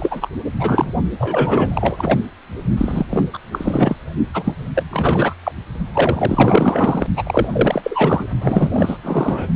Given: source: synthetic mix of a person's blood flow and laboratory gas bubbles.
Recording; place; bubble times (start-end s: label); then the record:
Doppler ultrasound of blood flow; precordium
0.00-0.28 s: bubbles
0.59-0.93 s: bubbles
1.19-2.19 s: bubbles
2.77-3.06 s: bubbles
3.10-3.26 s: bubbles
3.33-3.38 s: bubbles
3.52-3.96 s: bubbles
4.33-4.54 s: bubbles
4.75-4.84 s: bubbles
4.90-5.34 s: bubbles
5.43-5.52 s: bubbles
5.94-7.07 s: bubbles
7.16-7.48 s: bubbles
7.52-8.24 s: bubbles
8.42-8.98 s: bubbles
9.03-9.47 s: bubbles
From the record:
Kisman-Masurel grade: 444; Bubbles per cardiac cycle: continuous sound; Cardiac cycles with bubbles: 100%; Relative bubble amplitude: maximal (0.775 to 0.999); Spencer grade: 4 (maximum detectable bubble signal sounding continuously throughout systole and diastole of every cardiac period, and overriding the amplitude of the normal cardiac signals); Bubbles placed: only in the low amplitude regions of the cardiac cycle